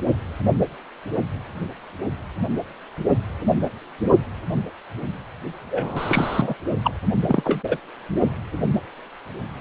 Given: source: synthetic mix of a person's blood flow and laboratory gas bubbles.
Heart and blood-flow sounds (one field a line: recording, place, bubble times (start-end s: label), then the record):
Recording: Doppler ultrasound of blood flow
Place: precordium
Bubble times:
5.71-6.54 s: bubbles
6.83-6.92 s: bubbles
7.28-7.61 s: bubbles
7.68-7.78 s: bubbles
From the record:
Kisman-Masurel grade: 223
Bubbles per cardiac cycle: several, 3 to 8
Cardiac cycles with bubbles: 10 to 50%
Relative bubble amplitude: loud (0.450 to 0.775)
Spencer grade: 2 (many but less than half of the cardiac periods contain bubble signals, singularly or in groups)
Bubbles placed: only in the low amplitude regions of the cardiac cycle